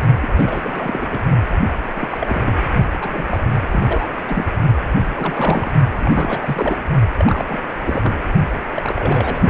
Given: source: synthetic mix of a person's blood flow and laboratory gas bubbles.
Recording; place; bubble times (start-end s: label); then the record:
Doppler ultrasound of blood flow; precordium
0.20-0.31 s: bubbles
0.35-1.21 s: bubbles
1.29-1.42 s: bubbles
1.95-2.58 s: bubbles
2.75-2.84 s: bubbles
3.01-3.42 s: bubbles
3.62-3.67 s: bubbles
3.71-4.05 s: bubbles
4.08-4.14 s: bubbles
4.27-4.46 s: bubbles
5.14-5.72 s: bubbles
5.98-6.84 s: bubbles
7.18-7.45 s: bubbles
7.49-7.61 s: bubbles
7.84-8.22 s: bubbles
8.74-9.50 s: bubbles
From the record:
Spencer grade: 3 (all of the cardiac periods contain showers or single bubble signals, but not dominating or overriding the cardiac motion signals); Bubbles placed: only in the low amplitude regions of the cardiac cycle